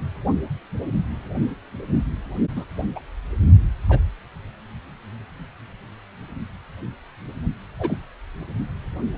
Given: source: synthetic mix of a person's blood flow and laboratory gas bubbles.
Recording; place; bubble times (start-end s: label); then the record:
Doppler ultrasound of blood flow; precordium
2.56-2.65 s: bubbles
2.96-3.00 s: bubbles
3.89-3.99 s: bubbles
7.79-7.96 s: bubbles
From the record:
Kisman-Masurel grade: 122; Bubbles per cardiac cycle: 1 to 2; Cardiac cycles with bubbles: 10 to 50%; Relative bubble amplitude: moderate (0.250 to 0.450); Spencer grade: 2 (many but less than half of the cardiac periods contain bubble signals, singularly or in groups); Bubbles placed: only in the low amplitude regions of the cardiac cycle